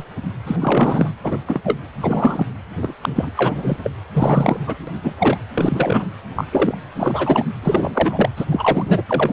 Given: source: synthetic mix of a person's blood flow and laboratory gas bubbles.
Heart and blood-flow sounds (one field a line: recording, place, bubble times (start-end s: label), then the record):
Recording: Doppler ultrasound of blood flow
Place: precordium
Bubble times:
0.00-0.04 s: bubbles
0.46-1.14 s: bubbles
1.23-1.38 s: bubbles
1.46-1.60 s: bubbles
1.64-1.78 s: bubbles
2.00-2.46 s: bubbles
2.82-2.93 s: bubbles
3.01-3.32 s: bubbles
3.37-3.77 s: bubbles
3.83-3.90 s: bubbles
4.13-4.57 s: bubbles
4.67-4.75 s: bubbles
4.87-4.92 s: bubbles
5.03-5.13 s: bubbles
5.18-5.37 s: bubbles
5.54-6.06 s: bubbles
6.35-6.44 s: bubbles
6.51-6.78 s: bubbles
6.95-7.44 s: bubbles
7.62-8.29 s: bubbles
8.36-8.45 s: bubbles
8.49-9.03 s: bubbles
9.09-9.33 s: bubbles
From the record:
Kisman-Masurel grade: 242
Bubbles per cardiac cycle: several, 3 to 8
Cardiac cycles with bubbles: 100%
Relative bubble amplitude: moderate (0.250 to 0.450)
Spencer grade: 3 (all of the cardiac periods contain showers or single bubble signals, but not dominating or overriding the cardiac motion signals)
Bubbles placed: anywhere in the cardiac cycle